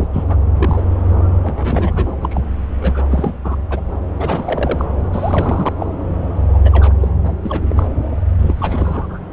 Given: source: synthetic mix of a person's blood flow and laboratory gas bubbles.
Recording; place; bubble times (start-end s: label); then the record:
Doppler ultrasound of blood flow; subclavian vein
0.00-0.07 s: bubbles
0.12-0.24 s: bubbles
0.27-0.36 s: bubbles
0.56-0.84 s: bubbles
1.42-2.17 s: bubbles
2.21-2.41 s: bubbles
2.80-3.03 s: bubbles
3.11-3.34 s: bubbles
3.44-3.55 s: bubbles
3.70-3.80 s: bubbles
4.19-4.86 s: bubbles
5.12-5.75 s: bubbles
5.79-5.87 s: bubbles
6.54-6.59 s: bubbles
6.65-6.93 s: bubbles
7.00-7.08 s: bubbles
7.23-7.35 s: bubbles
7.43-7.67 s: bubbles
7.70-7.89 s: bubbles
8.38-9.19 s: bubbles
From the record:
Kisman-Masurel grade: 342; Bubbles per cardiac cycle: rolling drumbeat, 9 or more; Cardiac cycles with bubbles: 100%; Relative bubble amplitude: moderate (0.250 to 0.450); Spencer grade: 3 (all of the cardiac periods contain showers or single bubble signals, but not dominating or overriding the cardiac motion signals); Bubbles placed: anywhere in the cardiac cycle